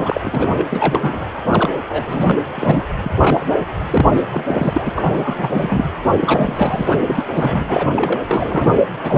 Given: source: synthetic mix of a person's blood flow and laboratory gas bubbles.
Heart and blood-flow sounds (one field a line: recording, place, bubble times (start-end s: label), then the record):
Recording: Doppler ultrasound of blood flow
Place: precordium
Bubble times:
0.00-0.67 s: bubbles
0.70-1.25 s: bubbles
1.49-1.70 s: bubbles
1.89-2.40 s: bubbles
2.54-2.83 s: bubbles
3.03-3.11 s: bubbles
3.20-3.46 s: bubbles
3.75-4.25 s: bubbles
4.32-4.92 s: bubbles
4.94-5.91 s: bubbles
6.20-7.04 s: bubbles
7.06-7.25 s: bubbles
7.34-7.89 s: bubbles
7.96-8.21 s: bubbles
8.28-8.73 s: bubbles
9.03-9.17 s: bubbles
From the record:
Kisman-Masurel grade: 342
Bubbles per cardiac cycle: rolling drumbeat, 9 or more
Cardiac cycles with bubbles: 100%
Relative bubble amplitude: moderate (0.250 to 0.450)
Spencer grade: 3 (all of the cardiac periods contain showers or single bubble signals, but not dominating or overriding the cardiac motion signals)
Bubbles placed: anywhere in the cardiac cycle